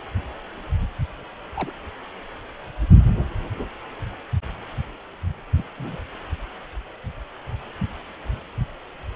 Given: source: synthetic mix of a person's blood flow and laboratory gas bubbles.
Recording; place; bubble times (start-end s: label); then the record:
Doppler ultrasound of blood flow; precordium
1.54-1.72 s: bubbles
5.56-5.64 s: bubbles
5.78-6.02 s: bubbles
From the record:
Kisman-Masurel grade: 121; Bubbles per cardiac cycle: 1 to 2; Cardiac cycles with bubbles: 10 to 50%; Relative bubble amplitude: barely perceptible (0.100 to 0.250); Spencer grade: 2 (many but less than half of the cardiac periods contain bubble signals, singularly or in groups); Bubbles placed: anywhere in the cardiac cycle